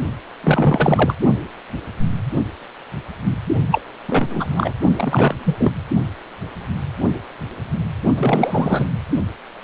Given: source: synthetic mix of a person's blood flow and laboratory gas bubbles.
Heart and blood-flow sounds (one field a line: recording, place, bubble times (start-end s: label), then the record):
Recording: Doppler ultrasound of blood flow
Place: precordium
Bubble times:
0.43-1.14 s: bubbles
3.71-3.81 s: bubbles
4.08-4.28 s: bubbles
4.30-4.46 s: bubbles
4.50-4.73 s: bubbles
4.96-5.34 s: bubbles
5.39-5.73 s: bubbles
8.18-8.85 s: bubbles
From the record:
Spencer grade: 3 (all of the cardiac periods contain showers or single bubble signals, but not dominating or overriding the cardiac motion signals)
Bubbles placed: only in the low amplitude regions of the cardiac cycle